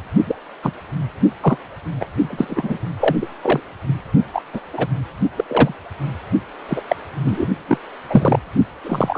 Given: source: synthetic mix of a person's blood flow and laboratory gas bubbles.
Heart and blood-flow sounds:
Doppler ultrasound of blood flow; precordium
0.27-0.35 s: bubbles
0.62-0.71 s: bubbles
1.41-1.58 s: bubbles
2.00-2.08 s: bubbles
2.19-2.78 s: bubbles
3.00-3.16 s: bubbles
3.21-3.27 s: bubbles
3.42-3.60 s: bubbles
3.87-4.01 s: bubbles
4.33-4.42 s: bubbles
4.53-4.60 s: bubbles
4.72-4.88 s: bubbles
5.36-5.44 s: bubbles
5.47-5.74 s: bubbles
6.67-6.82 s: bubbles
6.88-6.96 s: bubbles
7.24-7.46 s: bubbles
7.68-7.78 s: bubbles
8.09-8.39 s: bubbles
8.84-9.18 s: bubbles
From the record:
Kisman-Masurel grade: 243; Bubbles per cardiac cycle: several, 3 to 8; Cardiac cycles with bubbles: 100%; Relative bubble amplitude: loud (0.450 to 0.775); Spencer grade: 3 (all of the cardiac periods contain showers or single bubble signals, but not dominating or overriding the cardiac motion signals); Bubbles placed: only in the low amplitude regions of the cardiac cycle

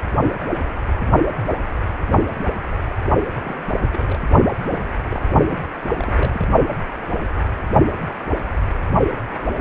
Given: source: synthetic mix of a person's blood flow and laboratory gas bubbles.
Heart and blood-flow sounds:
Doppler ultrasound of blood flow; precordium
3.32-3.42 s: bubbles
3.44-3.55 s: bubbles
3.84-4.18 s: bubbles
4.62-4.88 s: bubbles
5.11-5.23 s: bubbles
5.47-5.59 s: bubbles
5.84-5.94 s: bubbles
5.97-6.46 s: bubbles
From the record:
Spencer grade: 2 (many but less than half of the cardiac periods contain bubble signals, singularly or in groups); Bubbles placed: only in the low amplitude regions of the cardiac cycle

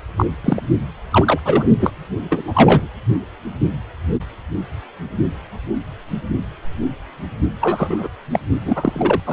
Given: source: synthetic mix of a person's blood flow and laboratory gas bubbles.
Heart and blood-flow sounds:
Doppler ultrasound of blood flow; precordium
0.18-0.25 s: bubbles
0.44-0.62 s: bubbles
1.10-1.40 s: bubbles
1.44-1.67 s: bubbles
1.79-1.92 s: bubbles
2.30-2.88 s: bubbles
7.61-8.08 s: bubbles
8.32-8.39 s: bubbles
8.65-9.21 s: bubbles
9.25-9.33 s: bubbles
From the record:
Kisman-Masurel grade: 233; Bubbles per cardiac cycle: several, 3 to 8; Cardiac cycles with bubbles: 50 to 99%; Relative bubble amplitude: loud (0.450 to 0.775); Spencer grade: 3 (all of the cardiac periods contain showers or single bubble signals, but not dominating or overriding the cardiac motion signals); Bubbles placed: only in the low amplitude regions of the cardiac cycle

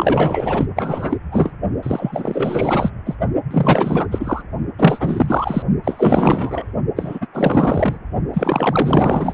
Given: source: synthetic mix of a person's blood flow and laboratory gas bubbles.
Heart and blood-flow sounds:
Doppler ultrasound of blood flow; precordium
0.00-0.66 s: bubbles
0.76-1.17 s: bubbles
1.31-1.53 s: bubbles
1.82-2.90 s: bubbles
3.05-3.15 s: bubbles
3.50-4.07 s: bubbles
4.11-4.42 s: bubbles
4.78-5.62 s: bubbles
5.83-6.72 s: bubbles
6.96-7.27 s: bubbles
7.33-7.98 s: bubbles
8.33-9.34 s: bubbles
From the record:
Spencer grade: 4 (maximum detectable bubble signal sounding continuously throughout systole and diastole of every cardiac period, and overriding the amplitude of the normal cardiac signals); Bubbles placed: only in the low amplitude regions of the cardiac cycle

